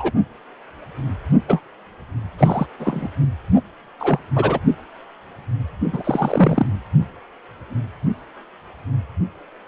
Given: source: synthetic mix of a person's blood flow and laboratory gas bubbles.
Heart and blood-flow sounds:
Doppler ultrasound of blood flow; precordium
0.00-0.11 s: bubbles
1.47-1.60 s: bubbles
2.38-2.66 s: bubbles
2.79-3.08 s: bubbles
3.56-3.61 s: bubbles
4.00-4.19 s: bubbles
4.35-4.59 s: bubbles
5.92-6.67 s: bubbles
From the record:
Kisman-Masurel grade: 223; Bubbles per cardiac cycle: several, 3 to 8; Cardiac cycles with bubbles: 10 to 50%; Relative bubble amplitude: loud (0.450 to 0.775); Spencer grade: 2 (many but less than half of the cardiac periods contain bubble signals, singularly or in groups); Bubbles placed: only in the low amplitude regions of the cardiac cycle

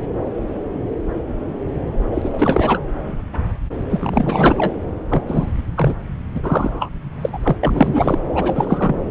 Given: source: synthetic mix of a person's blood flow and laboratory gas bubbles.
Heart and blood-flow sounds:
Doppler ultrasound of blood flow; subclavian vein
2.10-2.79 s: bubbles
3.89-4.74 s: bubbles
5.10-5.24 s: bubbles
5.27-5.52 s: bubbles
5.75-5.95 s: bubbles
6.35-6.90 s: bubbles
7.21-7.29 s: bubbles
7.33-7.39 s: bubbles
7.43-7.57 s: bubbles
7.63-8.18 s: bubbles
8.34-9.01 s: bubbles
From the record:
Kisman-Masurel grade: 333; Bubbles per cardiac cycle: rolling drumbeat, 9 or more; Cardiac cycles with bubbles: 50 to 99%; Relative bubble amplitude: loud (0.450 to 0.775); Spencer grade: 3 (all of the cardiac periods contain showers or single bubble signals, but not dominating or overriding the cardiac motion signals); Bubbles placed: anywhere in the cardiac cycle

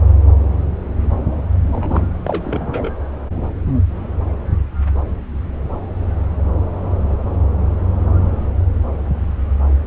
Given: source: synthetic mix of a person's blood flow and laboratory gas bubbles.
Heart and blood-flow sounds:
Doppler ultrasound of blood flow; subclavian vein
1.64-2.13 s: bubbles
2.23-2.90 s: bubbles
From the record:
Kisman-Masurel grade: 212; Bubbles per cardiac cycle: several, 3 to 8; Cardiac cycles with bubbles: 1 to 10%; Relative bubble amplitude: moderate (0.250 to 0.450); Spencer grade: 1 (occasional bubble signal discernible with the cardiac motion signal, with majority of cardiac periods free of bubbles); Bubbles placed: anywhere in the cardiac cycle

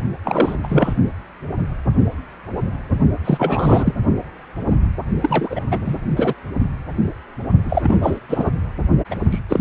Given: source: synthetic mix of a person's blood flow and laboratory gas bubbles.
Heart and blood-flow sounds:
Doppler ultrasound of blood flow; precordium
0.24-0.57 s: bubbles
0.63-0.93 s: bubbles
3.25-3.94 s: bubbles
5.22-5.61 s: bubbles
5.71-5.79 s: bubbles
5.84-5.96 s: bubbles
6.16-6.34 s: bubbles
7.65-8.19 s: bubbles
8.29-8.50 s: bubbles
9.10-9.16 s: bubbles
9.30-9.39 s: bubbles
9.48-9.61 s: bubbles
From the record:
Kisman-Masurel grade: 333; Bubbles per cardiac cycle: rolling drumbeat, 9 or more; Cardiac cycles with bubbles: 50 to 99%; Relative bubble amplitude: loud (0.450 to 0.775); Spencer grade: 3 (all of the cardiac periods contain showers or single bubble signals, but not dominating or overriding the cardiac motion signals); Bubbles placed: only in the low amplitude regions of the cardiac cycle

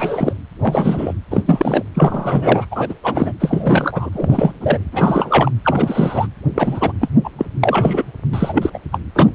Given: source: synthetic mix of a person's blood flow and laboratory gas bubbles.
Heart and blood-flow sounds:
Doppler ultrasound of blood flow; precordium
0.00-0.33 s: bubbles
0.61-1.13 s: bubbles
1.31-1.43 s: bubbles
1.46-1.83 s: bubbles
1.94-2.65 s: bubbles
2.71-2.94 s: bubbles
3.03-3.32 s: bubbles
3.40-4.10 s: bubbles
4.12-4.54 s: bubbles
4.60-4.78 s: bubbles
4.92-5.50 s: bubbles
5.64-6.27 s: bubbles
6.55-6.93 s: bubbles
7.00-7.10 s: bubbles
7.24-7.30 s: bubbles
7.38-7.46 s: bubbles
7.63-8.04 s: bubbles
8.31-8.70 s: bubbles
8.73-8.79 s: bubbles
8.92-8.99 s: bubbles
9.14-9.33 s: bubbles
From the record:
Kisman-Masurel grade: 343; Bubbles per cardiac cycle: rolling drumbeat, 9 or more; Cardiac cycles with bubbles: 100%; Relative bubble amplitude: loud (0.450 to 0.775); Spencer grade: 3 (all of the cardiac periods contain showers or single bubble signals, but not dominating or overriding the cardiac motion signals); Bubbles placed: anywhere in the cardiac cycle

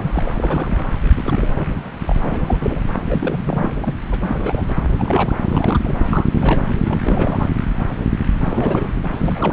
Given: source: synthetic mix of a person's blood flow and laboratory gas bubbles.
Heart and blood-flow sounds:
Doppler ultrasound of blood flow; subclavian vein
0.00-0.35 s: bubbles
0.38-0.88 s: bubbles
1.16-1.73 s: bubbles
2.03-2.84 s: bubbles
3.09-3.73 s: bubbles
3.80-3.95 s: bubbles
4.11-4.63 s: bubbles
4.88-5.34 s: bubbles
5.49-5.96 s: bubbles
6.08-6.27 s: bubbles
6.31-6.79 s: bubbles
6.85-7.00 s: bubbles
7.03-7.51 s: bubbles
8.44-8.95 s: bubbles
9.13-9.53 s: bubbles
From the record:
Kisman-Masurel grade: 332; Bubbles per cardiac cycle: rolling drumbeat, 9 or more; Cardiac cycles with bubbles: 50 to 99%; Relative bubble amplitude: moderate (0.250 to 0.450); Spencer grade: 3 (all of the cardiac periods contain showers or single bubble signals, but not dominating or overriding the cardiac motion signals); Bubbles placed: anywhere in the cardiac cycle

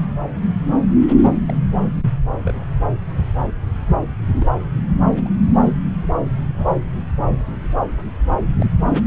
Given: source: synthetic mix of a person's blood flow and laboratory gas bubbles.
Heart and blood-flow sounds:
Doppler ultrasound of blood flow; subclavian vein
1.48-1.58 s: bubbles
2.44-2.63 s: bubbles
4.40-4.46 s: bubbles
5.26-5.29 s: bubbles
6.03-6.07 s: bubbles
6.39-6.71 s: bubbles
8.56-8.65 s: bubbles
From the record:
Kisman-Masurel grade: 121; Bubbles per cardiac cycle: 1 to 2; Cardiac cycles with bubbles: 10 to 50%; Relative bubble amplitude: barely perceptible (0.100 to 0.250); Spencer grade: 2 (many but less than half of the cardiac periods contain bubble signals, singularly or in groups); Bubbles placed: anywhere in the cardiac cycle

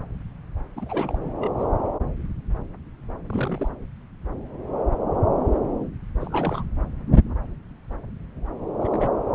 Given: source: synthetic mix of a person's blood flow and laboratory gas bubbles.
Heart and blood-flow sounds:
Doppler ultrasound of blood flow; subclavian vein
0.76-1.18 s: bubbles
1.40-1.51 s: bubbles
1.58-1.67 s: bubbles
3.27-3.72 s: bubbles
6.20-6.65 s: bubbles
8.80-9.09 s: bubbles
From the record:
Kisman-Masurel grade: 221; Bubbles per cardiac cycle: several, 3 to 8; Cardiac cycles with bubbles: 10 to 50%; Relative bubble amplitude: barely perceptible (0.100 to 0.250); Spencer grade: 2 (many but less than half of the cardiac periods contain bubble signals, singularly or in groups); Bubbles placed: anywhere in the cardiac cycle

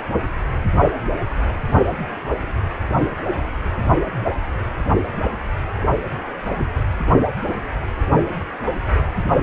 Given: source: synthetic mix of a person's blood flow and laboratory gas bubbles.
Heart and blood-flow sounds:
Doppler ultrasound of blood flow; precordium
no bubbles
From the record:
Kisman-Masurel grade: 000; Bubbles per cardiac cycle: 0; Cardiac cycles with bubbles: 0%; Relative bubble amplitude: no bubbles discernible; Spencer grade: 0 (complete lack of bubble signals)

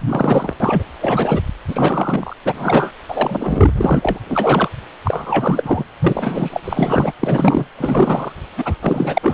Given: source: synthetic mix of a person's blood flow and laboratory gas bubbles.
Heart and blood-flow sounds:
Doppler ultrasound of blood flow; precordium
0.00-0.53 s: bubbles
0.60-0.83 s: bubbles
1.01-1.41 s: bubbles
1.67-2.33 s: bubbles
2.44-2.91 s: bubbles
3.08-3.70 s: bubbles
3.78-4.19 s: bubbles
4.29-4.69 s: bubbles
5.04-5.84 s: bubbles
6.00-6.61 s: bubbles
6.64-7.12 s: bubbles
7.20-7.67 s: bubbles
7.78-8.32 s: bubbles
8.57-8.74 s: bubbles
8.82-9.18 s: bubbles
9.22-9.34 s: bubbles
From the record:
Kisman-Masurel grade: 343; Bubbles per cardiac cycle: rolling drumbeat, 9 or more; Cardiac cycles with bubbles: 100%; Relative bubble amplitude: loud (0.450 to 0.775); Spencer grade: 3 (all of the cardiac periods contain showers or single bubble signals, but not dominating or overriding the cardiac motion signals); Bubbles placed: anywhere in the cardiac cycle

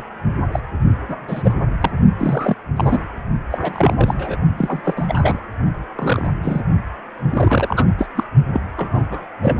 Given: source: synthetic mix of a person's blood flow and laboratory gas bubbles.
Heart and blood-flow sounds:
Doppler ultrasound of blood flow; precordium
0.00-0.03 s: bubbles
0.52-0.59 s: bubbles
1.08-1.15 s: bubbles
1.28-1.56 s: bubbles
1.81-1.91 s: bubbles
2.18-2.55 s: bubbles
2.76-2.99 s: bubbles
3.50-3.96 s: bubbles
3.99-4.36 s: bubbles
4.58-5.40 s: bubbles
5.96-6.30 s: bubbles
6.42-6.62 s: bubbles
7.29-7.85 s: bubbles
7.98-8.07 s: bubbles
8.15-8.24 s: bubbles
8.53-8.61 s: bubbles
8.76-9.26 s: bubbles
9.41-9.57 s: bubbles
From the record:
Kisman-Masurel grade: 242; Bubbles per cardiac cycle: several, 3 to 8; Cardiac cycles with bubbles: 100%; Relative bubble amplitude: moderate (0.250 to 0.450); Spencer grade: 3 (all of the cardiac periods contain showers or single bubble signals, but not dominating or overriding the cardiac motion signals); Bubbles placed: only in the low amplitude regions of the cardiac cycle

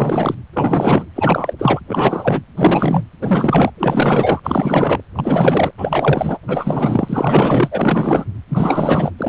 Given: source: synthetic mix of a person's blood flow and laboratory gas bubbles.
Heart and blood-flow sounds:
Doppler ultrasound of blood flow; precordium
0.00-0.34 s: bubbles
0.53-1.05 s: bubbles
1.15-1.54 s: bubbles
1.58-1.80 s: bubbles
1.88-2.42 s: bubbles
2.56-3.03 s: bubbles
3.21-3.71 s: bubbles
3.77-4.39 s: bubbles
4.43-5.00 s: bubbles
5.15-5.71 s: bubbles
5.77-6.38 s: bubbles
6.42-7.69 s: bubbles
7.71-8.25 s: bubbles
8.49-9.12 s: bubbles
9.18-9.29 s: bubbles
From the record:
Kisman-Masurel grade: 444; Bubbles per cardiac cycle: continuous sound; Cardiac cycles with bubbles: 100%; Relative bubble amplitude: maximal (0.775 to 0.999); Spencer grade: 4 (maximum detectable bubble signal sounding continuously throughout systole and diastole of every cardiac period, and overriding the amplitude of the normal cardiac signals); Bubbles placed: anywhere in the cardiac cycle

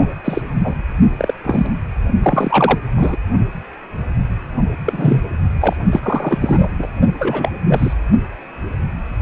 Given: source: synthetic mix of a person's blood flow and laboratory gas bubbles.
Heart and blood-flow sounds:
Doppler ultrasound of blood flow; precordium
0.00-0.15 s: bubbles
0.24-0.42 s: bubbles
0.64-0.75 s: bubbles
1.17-1.34 s: bubbles
1.44-1.73 s: bubbles
2.23-2.78 s: bubbles
2.96-3.17 s: bubbles
4.84-5.29 s: bubbles
5.61-5.76 s: bubbles
5.91-6.68 s: bubbles
6.79-6.87 s: bubbles
7.18-7.51 s: bubbles
7.64-7.94 s: bubbles
From the record:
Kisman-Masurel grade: 233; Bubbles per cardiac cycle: several, 3 to 8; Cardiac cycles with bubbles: 50 to 99%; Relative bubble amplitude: loud (0.450 to 0.775); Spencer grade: 3 (all of the cardiac periods contain showers or single bubble signals, but not dominating or overriding the cardiac motion signals); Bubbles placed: only in the low amplitude regions of the cardiac cycle

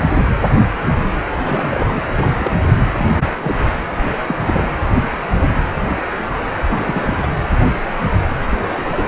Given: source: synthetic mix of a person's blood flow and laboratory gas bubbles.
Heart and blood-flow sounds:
Doppler ultrasound of blood flow; precordium
1.45-2.04 s: bubbles
2.08-2.52 s: bubbles
2.97-3.23 s: bubbles
3.38-3.56 s: bubbles
3.97-4.15 s: bubbles
4.28-4.36 s: bubbles
4.46-4.63 s: bubbles
6.68-7.32 s: bubbles
8.48-8.58 s: bubbles
8.61-9.08 s: bubbles
From the record:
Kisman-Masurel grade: 222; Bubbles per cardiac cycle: several, 3 to 8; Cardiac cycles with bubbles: 10 to 50%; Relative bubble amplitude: moderate (0.250 to 0.450); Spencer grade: 2 (many but less than half of the cardiac periods contain bubble signals, singularly or in groups); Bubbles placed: anywhere in the cardiac cycle

